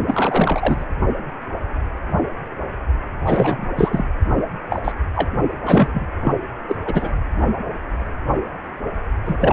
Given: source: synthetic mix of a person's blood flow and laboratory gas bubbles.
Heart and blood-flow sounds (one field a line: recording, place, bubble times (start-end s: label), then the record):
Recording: Doppler ultrasound of blood flow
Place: precordium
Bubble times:
0.07-0.85 s: bubbles
3.26-3.69 s: bubbles
3.76-4.04 s: bubbles
4.70-4.79 s: bubbles
4.84-4.92 s: bubbles
5.15-5.29 s: bubbles
5.66-5.88 s: bubbles
5.94-6.07 s: bubbles
6.21-6.36 s: bubbles
6.68-6.75 s: bubbles
6.85-7.13 s: bubbles
9.25-9.53 s: bubbles
From the record:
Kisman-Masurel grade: 233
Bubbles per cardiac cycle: several, 3 to 8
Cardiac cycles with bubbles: 50 to 99%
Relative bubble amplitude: loud (0.450 to 0.775)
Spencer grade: 3 (all of the cardiac periods contain showers or single bubble signals, but not dominating or overriding the cardiac motion signals)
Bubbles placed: only in the low amplitude regions of the cardiac cycle